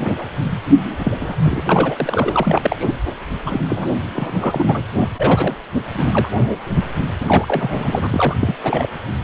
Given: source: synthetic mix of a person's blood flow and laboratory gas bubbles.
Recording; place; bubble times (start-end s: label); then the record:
Doppler ultrasound of blood flow; precordium
0.00-0.14 s: bubbles
0.18-0.26 s: bubbles
0.99-1.14 s: bubbles
1.21-1.36 s: bubbles
1.43-1.62 s: bubbles
1.66-2.95 s: bubbles
3.46-3.61 s: bubbles
3.69-3.92 s: bubbles
4.13-4.83 s: bubbles
5.00-5.08 s: bubbles
5.17-5.56 s: bubbles
5.75-5.80 s: bubbles
5.95-6.29 s: bubbles
7.20-8.37 s: bubbles
8.39-8.59 s: bubbles
8.63-8.89 s: bubbles
From the record:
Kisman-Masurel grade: 332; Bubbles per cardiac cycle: rolling drumbeat, 9 or more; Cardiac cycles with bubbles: 50 to 99%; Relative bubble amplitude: moderate (0.250 to 0.450); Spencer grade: 3 (all of the cardiac periods contain showers or single bubble signals, but not dominating or overriding the cardiac motion signals); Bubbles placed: anywhere in the cardiac cycle